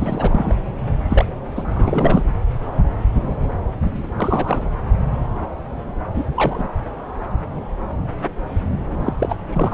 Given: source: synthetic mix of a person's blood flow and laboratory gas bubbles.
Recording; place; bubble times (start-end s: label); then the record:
Doppler ultrasound of blood flow; subclavian vein
0.00-0.55 s: bubbles
1.09-1.33 s: bubbles
1.55-1.64 s: bubbles
1.72-2.24 s: bubbles
4.16-4.62 s: bubbles
6.15-6.24 s: bubbles
6.35-6.69 s: bubbles
9.04-9.13 s: bubbles
9.19-9.36 s: bubbles
9.53-9.74 s: bubbles
From the record:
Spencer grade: 2 (many but less than half of the cardiac periods contain bubble signals, singularly or in groups); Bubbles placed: anywhere in the cardiac cycle